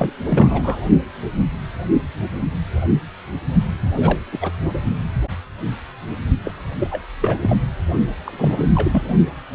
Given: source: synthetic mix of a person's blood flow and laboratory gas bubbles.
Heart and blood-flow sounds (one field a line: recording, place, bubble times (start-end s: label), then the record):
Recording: Doppler ultrasound of blood flow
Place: precordium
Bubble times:
0.00-0.13 s: bubbles
0.26-0.80 s: bubbles
3.96-4.21 s: bubbles
4.32-4.52 s: bubbles
6.44-6.52 s: bubbles
6.79-6.88 s: bubbles
6.90-7.04 s: bubbles
7.21-7.57 s: bubbles
8.24-8.72 s: bubbles
8.75-9.03 s: bubbles
From the record:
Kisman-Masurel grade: 232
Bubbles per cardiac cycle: several, 3 to 8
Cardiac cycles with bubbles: 50 to 99%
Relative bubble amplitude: moderate (0.250 to 0.450)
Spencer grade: 3 (all of the cardiac periods contain showers or single bubble signals, but not dominating or overriding the cardiac motion signals)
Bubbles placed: only in the low amplitude regions of the cardiac cycle